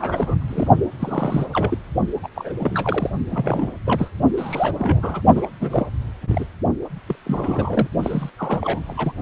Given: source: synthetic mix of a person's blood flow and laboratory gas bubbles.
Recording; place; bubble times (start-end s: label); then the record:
Doppler ultrasound of blood flow; precordium
0.00-0.67 s: bubbles
0.99-1.47 s: bubbles
1.53-1.78 s: bubbles
2.23-2.27 s: bubbles
2.32-2.53 s: bubbles
2.58-3.10 s: bubbles
3.30-3.71 s: bubbles
3.85-4.10 s: bubbles
4.38-4.71 s: bubbles
4.79-5.21 s: bubbles
5.35-5.47 s: bubbles
5.59-5.87 s: bubbles
6.21-6.45 s: bubbles
7.06-7.16 s: bubbles
7.25-7.89 s: bubbles
8.02-8.29 s: bubbles
8.38-8.80 s: bubbles
8.89-8.94 s: bubbles
8.97-9.12 s: bubbles
From the record:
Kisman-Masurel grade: 342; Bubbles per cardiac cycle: rolling drumbeat, 9 or more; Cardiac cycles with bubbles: 100%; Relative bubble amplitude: moderate (0.250 to 0.450); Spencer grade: 3 (all of the cardiac periods contain showers or single bubble signals, but not dominating or overriding the cardiac motion signals); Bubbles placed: only in the low amplitude regions of the cardiac cycle